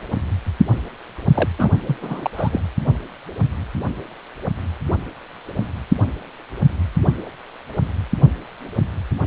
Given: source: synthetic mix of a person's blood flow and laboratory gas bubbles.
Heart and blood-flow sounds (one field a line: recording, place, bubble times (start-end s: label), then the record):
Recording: Doppler ultrasound of blood flow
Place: precordium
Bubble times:
1.34-1.48 s: bubbles
1.58-1.70 s: bubbles
1.87-1.97 s: bubbles
2.01-2.30 s: bubbles
2.37-2.60 s: bubbles
From the record:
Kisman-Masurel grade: 212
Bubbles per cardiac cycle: several, 3 to 8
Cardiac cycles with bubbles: 1 to 10%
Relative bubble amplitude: moderate (0.250 to 0.450)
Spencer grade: 1 (occasional bubble signal discernible with the cardiac motion signal, with majority of cardiac periods free of bubbles)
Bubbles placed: only in the low amplitude regions of the cardiac cycle